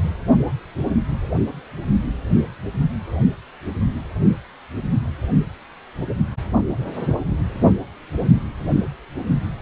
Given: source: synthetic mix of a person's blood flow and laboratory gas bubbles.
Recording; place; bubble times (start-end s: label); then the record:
Doppler ultrasound of blood flow; precordium
0.00-0.10 s: bubbles
From the record:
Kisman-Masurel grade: 111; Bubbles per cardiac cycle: 1 to 2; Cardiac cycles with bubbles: 1 to 10%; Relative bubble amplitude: barely perceptible (0.100 to 0.250); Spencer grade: 1 (occasional bubble signal discernible with the cardiac motion signal, with majority of cardiac periods free of bubbles); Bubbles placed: anywhere in the cardiac cycle